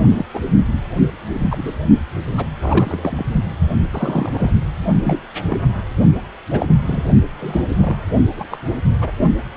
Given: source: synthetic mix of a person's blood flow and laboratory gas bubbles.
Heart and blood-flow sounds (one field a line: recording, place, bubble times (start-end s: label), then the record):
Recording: Doppler ultrasound of blood flow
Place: precordium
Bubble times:
0.00-0.05 s: bubbles
0.09-0.25 s: bubbles
0.33-0.40 s: bubbles
1.33-1.40 s: bubbles
1.50-1.74 s: bubbles
2.37-2.46 s: bubbles
2.62-3.34 s: bubbles
3.92-4.52 s: bubbles
5.03-5.20 s: bubbles
5.50-5.57 s: bubbles
6.51-6.66 s: bubbles
6.69-6.75 s: bubbles
6.84-7.03 s: bubbles
7.39-7.64 s: bubbles
7.68-7.96 s: bubbles
8.37-8.47 s: bubbles
8.50-8.57 s: bubbles
9.01-9.12 s: bubbles
From the record:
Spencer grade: 3 (all of the cardiac periods contain showers or single bubble signals, but not dominating or overriding the cardiac motion signals)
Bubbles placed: only in the low amplitude regions of the cardiac cycle